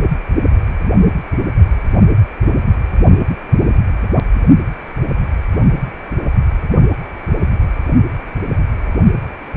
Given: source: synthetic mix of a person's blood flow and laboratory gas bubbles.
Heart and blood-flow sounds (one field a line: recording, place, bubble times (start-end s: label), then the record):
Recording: Doppler ultrasound of blood flow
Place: precordium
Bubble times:
no bubbles
From the record:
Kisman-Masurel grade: 000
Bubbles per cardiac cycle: 0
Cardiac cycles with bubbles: 0%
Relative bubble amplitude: no bubbles discernible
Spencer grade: 0 (complete lack of bubble signals)